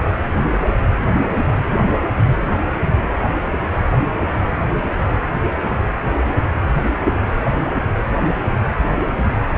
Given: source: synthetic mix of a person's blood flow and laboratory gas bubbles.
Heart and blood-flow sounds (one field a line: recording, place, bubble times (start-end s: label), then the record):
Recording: Doppler ultrasound of blood flow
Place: precordium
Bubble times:
no bubbles
From the record:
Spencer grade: 0 (complete lack of bubble signals)